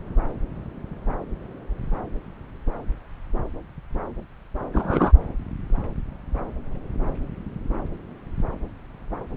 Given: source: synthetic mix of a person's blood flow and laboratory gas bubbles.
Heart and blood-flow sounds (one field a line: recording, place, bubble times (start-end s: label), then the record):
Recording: Doppler ultrasound of blood flow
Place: subclavian vein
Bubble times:
4.73-5.12 s: bubbles
From the record:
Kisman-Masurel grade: 113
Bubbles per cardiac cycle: 1 to 2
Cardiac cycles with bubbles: 1 to 10%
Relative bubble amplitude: loud (0.450 to 0.775)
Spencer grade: 1 (occasional bubble signal discernible with the cardiac motion signal, with majority of cardiac periods free of bubbles)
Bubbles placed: anywhere in the cardiac cycle